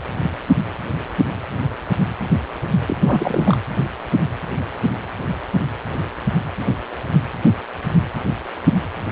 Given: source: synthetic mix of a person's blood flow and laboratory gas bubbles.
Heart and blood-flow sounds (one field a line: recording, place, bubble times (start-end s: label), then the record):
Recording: Doppler ultrasound of blood flow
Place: precordium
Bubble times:
2.88-3.57 s: bubbles
From the record:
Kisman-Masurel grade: 212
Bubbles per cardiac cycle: several, 3 to 8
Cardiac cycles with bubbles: 1 to 10%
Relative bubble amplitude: moderate (0.250 to 0.450)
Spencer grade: 1 (occasional bubble signal discernible with the cardiac motion signal, with majority of cardiac periods free of bubbles)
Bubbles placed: anywhere in the cardiac cycle